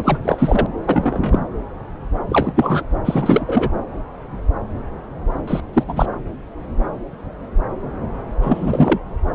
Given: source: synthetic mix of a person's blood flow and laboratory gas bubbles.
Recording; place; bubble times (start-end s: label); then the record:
Doppler ultrasound of blood flow; subclavian vein
0.04-0.18 s: bubbles
0.23-0.66 s: bubbles
0.86-1.42 s: bubbles
2.29-2.83 s: bubbles
3.04-3.69 s: bubbles
5.47-5.60 s: bubbles
5.73-5.83 s: bubbles
5.88-6.06 s: bubbles
8.41-8.99 s: bubbles
From the record:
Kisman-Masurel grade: 223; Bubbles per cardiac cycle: several, 3 to 8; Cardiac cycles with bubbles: 10 to 50%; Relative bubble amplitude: loud (0.450 to 0.775); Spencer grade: 2 (many but less than half of the cardiac periods contain bubble signals, singularly or in groups); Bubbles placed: anywhere in the cardiac cycle